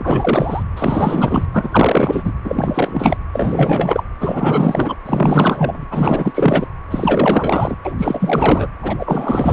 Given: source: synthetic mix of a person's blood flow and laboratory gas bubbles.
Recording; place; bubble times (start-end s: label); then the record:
Doppler ultrasound of blood flow; precordium
0.00-0.62 s: bubbles
0.75-1.47 s: bubbles
1.52-2.33 s: bubbles
2.44-3.17 s: bubbles
3.32-4.04 s: bubbles
4.20-4.96 s: bubbles
5.06-5.86 s: bubbles
5.90-6.68 s: bubbles
6.91-7.75 s: bubbles
7.85-7.92 s: bubbles
7.98-8.69 s: bubbles
8.82-8.96 s: bubbles
8.99-9.53 s: bubbles
From the record:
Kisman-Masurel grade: 444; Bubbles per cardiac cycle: continuous sound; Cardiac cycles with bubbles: 100%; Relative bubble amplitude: maximal (0.775 to 0.999); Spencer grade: 4 (maximum detectable bubble signal sounding continuously throughout systole and diastole of every cardiac period, and overriding the amplitude of the normal cardiac signals); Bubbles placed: anywhere in the cardiac cycle